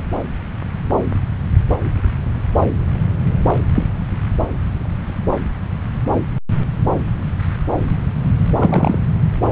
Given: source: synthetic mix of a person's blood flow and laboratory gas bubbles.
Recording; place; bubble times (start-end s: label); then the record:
Doppler ultrasound of blood flow; subclavian vein
3.75-3.85 s: bubbles
8.56-8.99 s: bubbles
From the record:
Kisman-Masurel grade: 113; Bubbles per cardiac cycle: 1 to 2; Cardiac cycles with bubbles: 1 to 10%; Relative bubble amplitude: loud (0.450 to 0.775); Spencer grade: 1 (occasional bubble signal discernible with the cardiac motion signal, with majority of cardiac periods free of bubbles); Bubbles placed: anywhere in the cardiac cycle